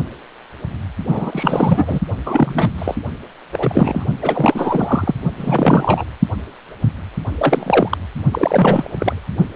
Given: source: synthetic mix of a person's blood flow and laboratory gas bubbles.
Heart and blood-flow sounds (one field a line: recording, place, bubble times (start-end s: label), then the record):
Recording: Doppler ultrasound of blood flow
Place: precordium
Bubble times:
1.09-1.99 s: bubbles
2.26-2.95 s: bubbles
3.53-4.05 s: bubbles
4.22-5.14 s: bubbles
5.38-6.04 s: bubbles
7.38-7.97 s: bubbles
8.32-9.20 s: bubbles
From the record:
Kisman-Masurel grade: 333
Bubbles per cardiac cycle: rolling drumbeat, 9 or more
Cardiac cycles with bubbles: 50 to 99%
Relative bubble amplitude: loud (0.450 to 0.775)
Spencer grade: 3 (all of the cardiac periods contain showers or single bubble signals, but not dominating or overriding the cardiac motion signals)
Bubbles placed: only in the low amplitude regions of the cardiac cycle